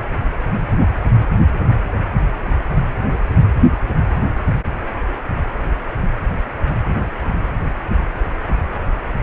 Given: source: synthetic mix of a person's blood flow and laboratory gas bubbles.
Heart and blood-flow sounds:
Doppler ultrasound of blood flow; precordium
1.68-1.84 s: bubbles
From the record:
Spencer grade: 1 (occasional bubble signal discernible with the cardiac motion signal, with majority of cardiac periods free of bubbles); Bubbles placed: anywhere in the cardiac cycle

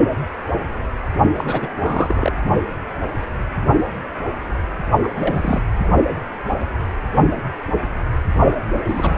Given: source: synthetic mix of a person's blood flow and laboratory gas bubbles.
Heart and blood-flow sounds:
Doppler ultrasound of blood flow; precordium
1.36-1.70 s: bubbles
1.80-2.32 s: bubbles
5.03-5.08 s: bubbles
5.17-5.62 s: bubbles
8.52-8.56 s: bubbles
8.74-8.79 s: bubbles
8.86-9.18 s: bubbles
From the record:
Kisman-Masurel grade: 332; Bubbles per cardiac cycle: rolling drumbeat, 9 or more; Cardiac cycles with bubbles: 50 to 99%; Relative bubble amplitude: moderate (0.250 to 0.450); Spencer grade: 3 (all of the cardiac periods contain showers or single bubble signals, but not dominating or overriding the cardiac motion signals); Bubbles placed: only in the low amplitude regions of the cardiac cycle

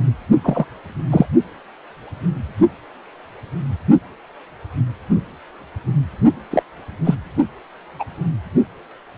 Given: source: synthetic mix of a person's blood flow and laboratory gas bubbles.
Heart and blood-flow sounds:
Doppler ultrasound of blood flow; precordium
0.44-0.66 s: bubbles
1.11-1.26 s: bubbles
6.51-6.62 s: bubbles
7.04-7.15 s: bubbles
7.99-8.04 s: bubbles
From the record:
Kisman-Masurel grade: 123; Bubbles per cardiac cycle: 1 to 2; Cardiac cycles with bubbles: 10 to 50%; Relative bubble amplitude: loud (0.450 to 0.775); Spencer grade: 2 (many but less than half of the cardiac periods contain bubble signals, singularly or in groups); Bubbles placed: only in the low amplitude regions of the cardiac cycle

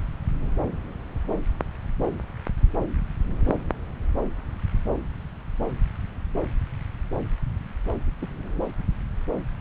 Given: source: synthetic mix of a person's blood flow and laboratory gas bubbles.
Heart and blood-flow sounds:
Doppler ultrasound of blood flow; subclavian vein
3.46-3.55 s: bubbles
8.22-8.27 s: bubbles
From the record:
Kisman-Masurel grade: 111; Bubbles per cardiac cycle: 1 to 2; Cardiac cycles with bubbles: 1 to 10%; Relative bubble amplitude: barely perceptible (0.100 to 0.250); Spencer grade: 1 (occasional bubble signal discernible with the cardiac motion signal, with majority of cardiac periods free of bubbles); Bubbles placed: anywhere in the cardiac cycle

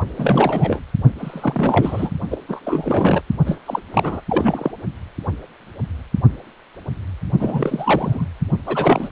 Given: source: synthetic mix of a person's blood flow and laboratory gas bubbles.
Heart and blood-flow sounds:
Doppler ultrasound of blood flow; precordium
0.18-0.80 s: bubbles
1.18-2.09 s: bubbles
2.30-2.37 s: bubbles
2.48-3.22 s: bubbles
3.45-3.58 s: bubbles
3.66-3.79 s: bubbles
3.92-4.21 s: bubbles
4.29-4.71 s: bubbles
7.39-8.27 s: bubbles
8.66-9.09 s: bubbles
From the record:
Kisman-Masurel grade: 333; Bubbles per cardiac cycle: rolling drumbeat, 9 or more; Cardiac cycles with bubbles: 50 to 99%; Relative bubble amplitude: loud (0.450 to 0.775); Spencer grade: 3 (all of the cardiac periods contain showers or single bubble signals, but not dominating or overriding the cardiac motion signals); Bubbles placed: only in the low amplitude regions of the cardiac cycle

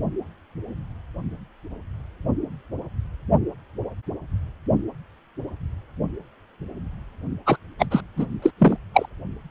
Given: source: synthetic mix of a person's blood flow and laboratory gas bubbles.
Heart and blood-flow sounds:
Doppler ultrasound of blood flow; precordium
7.46-7.57 s: bubbles
7.79-7.86 s: bubbles
7.91-8.01 s: bubbles
8.16-8.26 s: bubbles
8.42-8.50 s: bubbles
8.58-8.77 s: bubbles
8.93-9.06 s: bubbles
From the record:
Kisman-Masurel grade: 223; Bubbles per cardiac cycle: several, 3 to 8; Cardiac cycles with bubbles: 10 to 50%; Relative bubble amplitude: loud (0.450 to 0.775); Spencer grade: 2 (many but less than half of the cardiac periods contain bubble signals, singularly or in groups); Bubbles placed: only in the low amplitude regions of the cardiac cycle

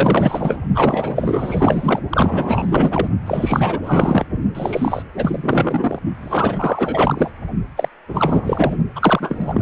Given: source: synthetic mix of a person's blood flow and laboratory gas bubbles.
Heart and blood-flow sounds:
Doppler ultrasound of blood flow; precordium
0.00-0.61 s: bubbles
0.74-2.00 s: bubbles
2.09-3.08 s: bubbles
3.26-3.79 s: bubbles
3.83-4.25 s: bubbles
4.54-5.02 s: bubbles
5.13-5.99 s: bubbles
6.21-7.30 s: bubbles
7.76-7.88 s: bubbles
8.08-8.78 s: bubbles
8.96-9.62 s: bubbles
From the record:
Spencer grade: 4 (maximum detectable bubble signal sounding continuously throughout systole and diastole of every cardiac period, and overriding the amplitude of the normal cardiac signals); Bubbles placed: only in the low amplitude regions of the cardiac cycle

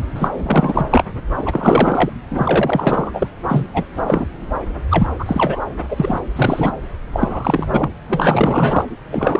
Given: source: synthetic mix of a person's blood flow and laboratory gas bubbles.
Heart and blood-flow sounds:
Doppler ultrasound of blood flow; subclavian vein
0.14-0.30 s: bubbles
0.35-0.87 s: bubbles
0.89-1.04 s: bubbles
1.37-2.10 s: bubbles
2.31-3.27 s: bubbles
3.48-3.66 s: bubbles
3.74-3.83 s: bubbles
3.97-4.25 s: bubbles
4.90-5.07 s: bubbles
5.19-5.59 s: bubbles
5.88-6.20 s: bubbles
6.35-6.72 s: bubbles
7.12-7.90 s: bubbles
8.08-8.84 s: bubbles
9.12-9.40 s: bubbles
From the record:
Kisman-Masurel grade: 343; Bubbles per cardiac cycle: rolling drumbeat, 9 or more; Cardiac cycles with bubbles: 100%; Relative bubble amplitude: loud (0.450 to 0.775); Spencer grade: 3 (all of the cardiac periods contain showers or single bubble signals, but not dominating or overriding the cardiac motion signals); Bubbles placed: anywhere in the cardiac cycle

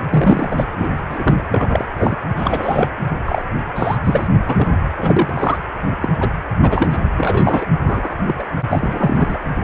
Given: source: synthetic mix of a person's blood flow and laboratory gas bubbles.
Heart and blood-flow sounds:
Doppler ultrasound of blood flow; precordium
0.09-0.64 s: bubbles
0.78-1.04 s: bubbles
1.09-1.43 s: bubbles
1.51-1.85 s: bubbles
1.97-2.16 s: bubbles
2.37-2.88 s: bubbles
3.25-3.42 s: bubbles
3.76-3.97 s: bubbles
4.04-4.27 s: bubbles
4.46-4.68 s: bubbles
4.98-5.58 s: bubbles
6.01-6.08 s: bubbles
6.20-6.33 s: bubbles
6.62-6.99 s: bubbles
7.17-7.66 s: bubbles
7.87-8.15 s: bubbles
8.27-8.35 s: bubbles
8.38-8.43 s: bubbles
8.71-9.38 s: bubbles
From the record:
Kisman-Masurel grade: 243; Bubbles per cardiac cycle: several, 3 to 8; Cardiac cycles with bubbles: 100%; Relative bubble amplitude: loud (0.450 to 0.775); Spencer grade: 3 (all of the cardiac periods contain showers or single bubble signals, but not dominating or overriding the cardiac motion signals); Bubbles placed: anywhere in the cardiac cycle

